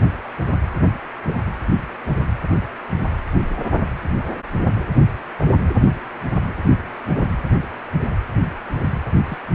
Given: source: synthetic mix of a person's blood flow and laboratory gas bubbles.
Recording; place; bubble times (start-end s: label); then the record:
Doppler ultrasound of blood flow; precordium
0.85-0.93 s: bubbles
1.27-1.41 s: bubbles
3.56-3.60 s: bubbles
3.70-3.78 s: bubbles
5.38-5.47 s: bubbles
8.42-8.55 s: bubbles
9.28-9.38 s: bubbles
From the record:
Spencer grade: 2 (many but less than half of the cardiac periods contain bubble signals, singularly or in groups); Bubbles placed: anywhere in the cardiac cycle